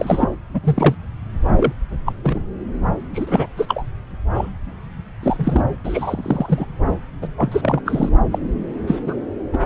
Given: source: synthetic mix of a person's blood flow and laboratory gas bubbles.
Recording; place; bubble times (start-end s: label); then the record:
Doppler ultrasound of blood flow; subclavian vein
0.00-0.29 s: bubbles
0.54-0.60 s: bubbles
0.64-0.95 s: bubbles
1.56-1.72 s: bubbles
2.06-2.12 s: bubbles
2.23-2.42 s: bubbles
3.13-3.46 s: bubbles
3.56-3.84 s: bubbles
4.34-4.49 s: bubbles
5.22-5.64 s: bubbles
5.85-6.65 s: bubbles
7.21-7.28 s: bubbles
7.37-7.80 s: bubbles
7.86-8.09 s: bubbles
8.32-8.38 s: bubbles
8.87-9.00 s: bubbles
9.05-9.17 s: bubbles
9.53-9.58 s: bubbles
From the record:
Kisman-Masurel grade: 242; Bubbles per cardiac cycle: several, 3 to 8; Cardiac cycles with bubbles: 100%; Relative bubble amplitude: moderate (0.250 to 0.450); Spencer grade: 3 (all of the cardiac periods contain showers or single bubble signals, but not dominating or overriding the cardiac motion signals); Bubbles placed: anywhere in the cardiac cycle